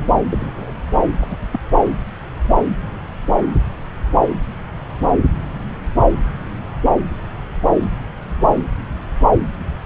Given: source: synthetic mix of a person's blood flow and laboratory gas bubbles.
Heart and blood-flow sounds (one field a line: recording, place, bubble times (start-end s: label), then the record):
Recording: Doppler ultrasound of blood flow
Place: subclavian vein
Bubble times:
0.31-0.53 s: bubbles
0.56-0.71 s: bubbles
1.21-1.26 s: bubbles
1.30-1.37 s: bubbles
1.51-1.59 s: bubbles
From the record:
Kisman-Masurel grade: 212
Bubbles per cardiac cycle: several, 3 to 8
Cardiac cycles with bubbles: 1 to 10%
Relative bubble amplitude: moderate (0.250 to 0.450)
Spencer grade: 1 (occasional bubble signal discernible with the cardiac motion signal, with majority of cardiac periods free of bubbles)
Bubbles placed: anywhere in the cardiac cycle